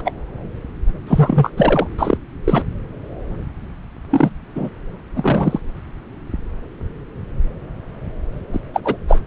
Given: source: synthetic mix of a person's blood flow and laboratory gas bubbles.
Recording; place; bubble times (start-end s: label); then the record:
Doppler ultrasound of blood flow; subclavian vein
0.04-0.12 s: bubbles
1.06-1.50 s: bubbles
1.57-1.88 s: bubbles
1.98-2.17 s: bubbles
2.44-2.64 s: bubbles
4.10-4.29 s: bubbles
4.55-4.69 s: bubbles
5.14-5.59 s: bubbles
8.53-8.60 s: bubbles
8.74-8.81 s: bubbles
8.85-8.96 s: bubbles
9.08-9.21 s: bubbles
From the record:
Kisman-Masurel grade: 233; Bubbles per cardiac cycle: several, 3 to 8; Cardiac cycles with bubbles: 50 to 99%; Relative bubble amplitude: loud (0.450 to 0.775); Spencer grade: 3 (all of the cardiac periods contain showers or single bubble signals, but not dominating or overriding the cardiac motion signals); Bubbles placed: anywhere in the cardiac cycle